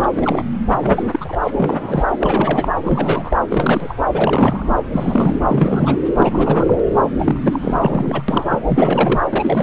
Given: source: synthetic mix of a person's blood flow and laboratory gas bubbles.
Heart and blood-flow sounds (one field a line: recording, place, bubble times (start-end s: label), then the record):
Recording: Doppler ultrasound of blood flow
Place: subclavian vein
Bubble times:
0.00-0.07 s: bubbles
0.15-0.44 s: bubbles
0.77-1.04 s: bubbles
1.12-1.38 s: bubbles
1.43-1.51 s: bubbles
1.57-2.06 s: bubbles
2.20-2.68 s: bubbles
2.84-3.36 s: bubbles
3.49-3.95 s: bubbles
4.11-4.70 s: bubbles
4.92-5.41 s: bubbles
5.48-6.02 s: bubbles
6.16-6.80 s: bubbles
7.19-8.23 s: bubbles
8.28-8.45 s: bubbles
8.48-8.60 s: bubbles
8.65-9.21 s: bubbles
9.31-9.63 s: bubbles
From the record:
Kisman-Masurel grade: 342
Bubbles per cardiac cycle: rolling drumbeat, 9 or more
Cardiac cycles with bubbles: 100%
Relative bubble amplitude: moderate (0.250 to 0.450)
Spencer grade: 3 (all of the cardiac periods contain showers or single bubble signals, but not dominating or overriding the cardiac motion signals)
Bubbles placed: anywhere in the cardiac cycle